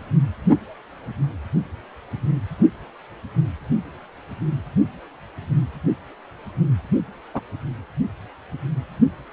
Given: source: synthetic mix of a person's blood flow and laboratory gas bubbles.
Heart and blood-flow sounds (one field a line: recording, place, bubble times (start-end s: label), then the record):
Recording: Doppler ultrasound of blood flow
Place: precordium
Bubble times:
7.34-7.41 s: bubbles
From the record:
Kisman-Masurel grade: 112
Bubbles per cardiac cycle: 1 to 2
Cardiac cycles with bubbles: 1 to 10%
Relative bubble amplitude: moderate (0.250 to 0.450)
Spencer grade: 1 (occasional bubble signal discernible with the cardiac motion signal, with majority of cardiac periods free of bubbles)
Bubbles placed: only in the low amplitude regions of the cardiac cycle